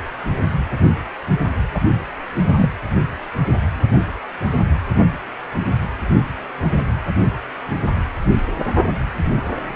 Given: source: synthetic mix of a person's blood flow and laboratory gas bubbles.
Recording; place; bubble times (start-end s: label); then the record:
Doppler ultrasound of blood flow; precordium
1.74-1.80 s: bubbles
2.46-2.71 s: bubbles
From the record:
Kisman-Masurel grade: 113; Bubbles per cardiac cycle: 1 to 2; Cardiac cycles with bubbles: 1 to 10%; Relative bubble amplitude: loud (0.450 to 0.775); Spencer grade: 1 (occasional bubble signal discernible with the cardiac motion signal, with majority of cardiac periods free of bubbles); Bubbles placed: anywhere in the cardiac cycle